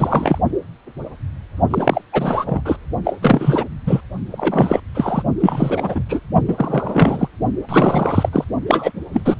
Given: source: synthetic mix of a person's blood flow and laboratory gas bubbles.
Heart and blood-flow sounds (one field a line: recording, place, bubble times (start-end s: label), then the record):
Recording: Doppler ultrasound of blood flow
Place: precordium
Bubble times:
0.00-0.38 s: bubbles
1.70-2.02 s: bubbles
2.12-2.61 s: bubbles
2.65-2.77 s: bubbles
3.04-3.19 s: bubbles
3.22-3.65 s: bubbles
3.87-4.01 s: bubbles
4.32-4.80 s: bubbles
4.94-5.23 s: bubbles
5.40-6.04 s: bubbles
6.08-6.20 s: bubbles
6.48-7.29 s: bubbles
7.69-8.29 s: bubbles
8.32-8.45 s: bubbles
8.67-8.92 s: bubbles
9.12-9.21 s: bubbles
9.25-9.36 s: bubbles
From the record:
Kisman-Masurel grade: 333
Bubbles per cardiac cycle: rolling drumbeat, 9 or more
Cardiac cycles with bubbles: 50 to 99%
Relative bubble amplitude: loud (0.450 to 0.775)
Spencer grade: 3 (all of the cardiac periods contain showers or single bubble signals, but not dominating or overriding the cardiac motion signals)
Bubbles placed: only in the low amplitude regions of the cardiac cycle